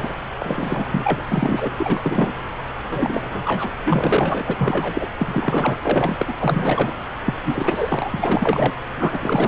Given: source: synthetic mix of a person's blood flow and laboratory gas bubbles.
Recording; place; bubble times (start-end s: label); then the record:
Doppler ultrasound of blood flow; subclavian vein
0.00-0.14 s: bubbles
0.39-1.71 s: bubbles
1.77-2.33 s: bubbles
2.89-3.71 s: bubbles
3.84-4.54 s: bubbles
4.57-5.07 s: bubbles
5.19-5.77 s: bubbles
5.83-6.33 s: bubbles
6.38-6.93 s: bubbles
7.25-7.34 s: bubbles
7.44-8.09 s: bubbles
8.13-8.81 s: bubbles
8.97-9.47 s: bubbles
From the record:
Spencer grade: 3 (all of the cardiac periods contain showers or single bubble signals, but not dominating or overriding the cardiac motion signals); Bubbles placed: anywhere in the cardiac cycle